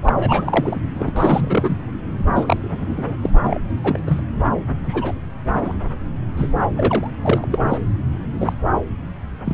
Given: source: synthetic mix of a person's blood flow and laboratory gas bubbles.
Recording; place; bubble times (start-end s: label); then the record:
Doppler ultrasound of blood flow; subclavian vein
0.04-0.13 s: bubbles
0.16-0.80 s: bubbles
0.94-1.11 s: bubbles
1.16-1.78 s: bubbles
2.35-3.15 s: bubbles
3.23-3.29 s: bubbles
3.43-3.58 s: bubbles
3.83-3.99 s: bubbles
4.07-4.23 s: bubbles
4.86-5.14 s: bubbles
5.64-5.75 s: bubbles
6.37-6.52 s: bubbles
6.75-7.10 s: bubbles
7.21-7.59 s: bubbles
7.69-7.79 s: bubbles
8.39-8.53 s: bubbles
9.44-9.54 s: bubbles
From the record:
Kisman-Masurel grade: 242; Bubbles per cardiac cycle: several, 3 to 8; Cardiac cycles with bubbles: 100%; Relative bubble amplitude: moderate (0.250 to 0.450); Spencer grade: 3 (all of the cardiac periods contain showers or single bubble signals, but not dominating or overriding the cardiac motion signals); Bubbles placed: anywhere in the cardiac cycle